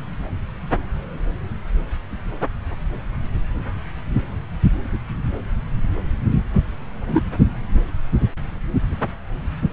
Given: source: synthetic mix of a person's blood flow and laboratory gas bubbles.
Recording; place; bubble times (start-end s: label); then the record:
Doppler ultrasound of blood flow; subclavian vein
7.07-7.21 s: bubbles
From the record:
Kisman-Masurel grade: 113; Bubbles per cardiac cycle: 1 to 2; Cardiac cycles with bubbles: 1 to 10%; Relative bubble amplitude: loud (0.450 to 0.775); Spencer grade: 1 (occasional bubble signal discernible with the cardiac motion signal, with majority of cardiac periods free of bubbles); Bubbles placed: anywhere in the cardiac cycle